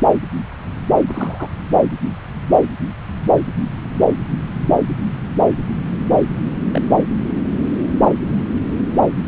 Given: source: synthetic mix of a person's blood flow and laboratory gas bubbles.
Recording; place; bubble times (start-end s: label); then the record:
Doppler ultrasound of blood flow; subclavian vein
1.08-1.50 s: bubbles
6.74-6.81 s: bubbles
From the record:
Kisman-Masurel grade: 121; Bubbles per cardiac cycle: 1 to 2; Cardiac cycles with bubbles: 10 to 50%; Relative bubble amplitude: barely perceptible (0.100 to 0.250); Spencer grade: 2 (many but less than half of the cardiac periods contain bubble signals, singularly or in groups); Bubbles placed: anywhere in the cardiac cycle